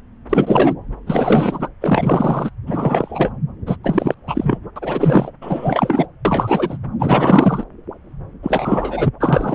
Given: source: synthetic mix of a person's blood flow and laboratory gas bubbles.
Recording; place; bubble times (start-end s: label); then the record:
Doppler ultrasound of blood flow; subclavian vein
0.29-0.74 s: bubbles
1.06-1.68 s: bubbles
1.81-2.50 s: bubbles
2.67-3.32 s: bubbles
3.66-3.76 s: bubbles
3.83-4.14 s: bubbles
4.27-4.58 s: bubbles
4.76-5.32 s: bubbles
5.42-6.06 s: bubbles
6.25-6.77 s: bubbles
7.00-7.64 s: bubbles
8.43-9.08 s: bubbles
9.20-9.55 s: bubbles
From the record:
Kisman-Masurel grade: 333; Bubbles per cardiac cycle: rolling drumbeat, 9 or more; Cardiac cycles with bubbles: 50 to 99%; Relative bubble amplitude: loud (0.450 to 0.775); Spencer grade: 3 (all of the cardiac periods contain showers or single bubble signals, but not dominating or overriding the cardiac motion signals); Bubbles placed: anywhere in the cardiac cycle